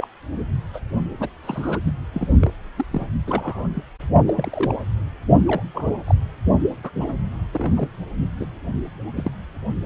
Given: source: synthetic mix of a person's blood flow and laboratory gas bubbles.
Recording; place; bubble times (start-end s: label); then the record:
Doppler ultrasound of blood flow; precordium
0.00-0.08 s: bubbles
0.73-0.80 s: bubbles
1.18-1.29 s: bubbles
1.42-1.79 s: bubbles
1.85-1.92 s: bubbles
2.14-2.27 s: bubbles
2.40-2.50 s: bubbles
2.76-2.86 s: bubbles
2.90-3.10 s: bubbles
3.27-3.69 s: bubbles
3.75-3.83 s: bubbles
4.27-4.77 s: bubbles
5.47-5.62 s: bubbles
5.74-5.88 s: bubbles
6.06-6.15 s: bubbles
6.83-6.90 s: bubbles
7.00-7.12 s: bubbles
7.54-7.88 s: bubbles
8.39-8.47 s: bubbles
9.15-9.31 s: bubbles
From the record:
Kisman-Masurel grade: 242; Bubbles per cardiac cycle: several, 3 to 8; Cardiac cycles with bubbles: 100%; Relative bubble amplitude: moderate (0.250 to 0.450); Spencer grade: 3 (all of the cardiac periods contain showers or single bubble signals, but not dominating or overriding the cardiac motion signals); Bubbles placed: only in the low amplitude regions of the cardiac cycle